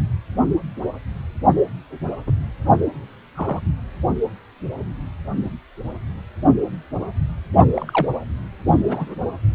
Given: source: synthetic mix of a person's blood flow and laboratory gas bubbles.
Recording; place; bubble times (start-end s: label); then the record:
Doppler ultrasound of blood flow; precordium
2.26-2.31 s: bubbles
3.35-3.60 s: bubbles
7.74-8.12 s: bubbles
8.87-9.14 s: bubbles
From the record:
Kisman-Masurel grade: 122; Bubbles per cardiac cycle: 1 to 2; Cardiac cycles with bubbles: 10 to 50%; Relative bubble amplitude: moderate (0.250 to 0.450); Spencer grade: 2 (many but less than half of the cardiac periods contain bubble signals, singularly or in groups); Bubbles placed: only in the low amplitude regions of the cardiac cycle